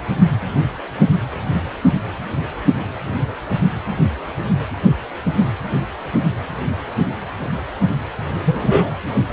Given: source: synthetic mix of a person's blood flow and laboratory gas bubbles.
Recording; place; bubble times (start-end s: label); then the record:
Doppler ultrasound of blood flow; precordium
8.46-8.93 s: bubbles
From the record:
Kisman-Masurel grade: 113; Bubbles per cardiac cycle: 1 to 2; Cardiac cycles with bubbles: 1 to 10%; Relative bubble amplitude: loud (0.450 to 0.775); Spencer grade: 1 (occasional bubble signal discernible with the cardiac motion signal, with majority of cardiac periods free of bubbles); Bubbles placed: anywhere in the cardiac cycle